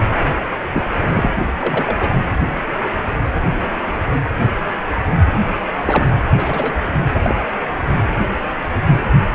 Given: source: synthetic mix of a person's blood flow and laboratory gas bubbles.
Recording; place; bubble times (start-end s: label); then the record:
Doppler ultrasound of blood flow; precordium
0.74-0.82 s: bubbles
1.06-1.28 s: bubbles
1.61-1.96 s: bubbles
1.99-2.16 s: bubbles
5.78-6.13 s: bubbles
6.35-6.74 s: bubbles
7.13-7.20 s: bubbles
7.22-7.34 s: bubbles
From the record:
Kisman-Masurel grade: 222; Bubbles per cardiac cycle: several, 3 to 8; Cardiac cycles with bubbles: 10 to 50%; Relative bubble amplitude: moderate (0.250 to 0.450); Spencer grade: 2 (many but less than half of the cardiac periods contain bubble signals, singularly or in groups); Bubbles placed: anywhere in the cardiac cycle